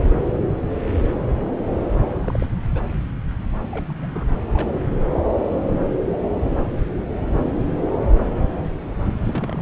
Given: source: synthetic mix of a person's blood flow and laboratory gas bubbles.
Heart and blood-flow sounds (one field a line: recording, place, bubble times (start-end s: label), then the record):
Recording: Doppler ultrasound of blood flow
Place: subclavian vein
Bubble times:
2.21-2.48 s: bubbles
2.74-2.81 s: bubbles
3.57-4.07 s: bubbles
4.14-4.25 s: bubbles
4.53-4.69 s: bubbles
9.21-9.62 s: bubbles
From the record:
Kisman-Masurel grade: 221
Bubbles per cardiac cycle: several, 3 to 8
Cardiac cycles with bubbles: 10 to 50%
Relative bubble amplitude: barely perceptible (0.100 to 0.250)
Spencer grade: 2 (many but less than half of the cardiac periods contain bubble signals, singularly or in groups)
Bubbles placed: anywhere in the cardiac cycle